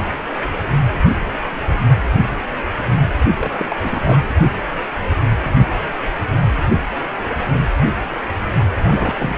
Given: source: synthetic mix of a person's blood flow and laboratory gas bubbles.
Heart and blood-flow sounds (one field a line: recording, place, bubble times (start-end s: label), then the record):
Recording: Doppler ultrasound of blood flow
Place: precordium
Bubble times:
3.38-3.75 s: bubbles
3.82-4.20 s: bubbles
8.75-9.38 s: bubbles
From the record:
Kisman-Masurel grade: 332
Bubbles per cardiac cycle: rolling drumbeat, 9 or more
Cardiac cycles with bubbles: 50 to 99%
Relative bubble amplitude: moderate (0.250 to 0.450)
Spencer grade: 3 (all of the cardiac periods contain showers or single bubble signals, but not dominating or overriding the cardiac motion signals)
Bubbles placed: only in the low amplitude regions of the cardiac cycle